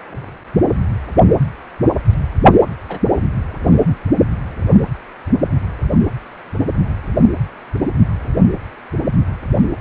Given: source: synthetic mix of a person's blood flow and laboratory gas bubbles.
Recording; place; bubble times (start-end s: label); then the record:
Doppler ultrasound of blood flow; precordium
2.89-2.99 s: bubbles
From the record:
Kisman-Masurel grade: 112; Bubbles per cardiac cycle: 1 to 2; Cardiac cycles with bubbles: 1 to 10%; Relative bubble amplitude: moderate (0.250 to 0.450); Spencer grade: 1 (occasional bubble signal discernible with the cardiac motion signal, with majority of cardiac periods free of bubbles); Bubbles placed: anywhere in the cardiac cycle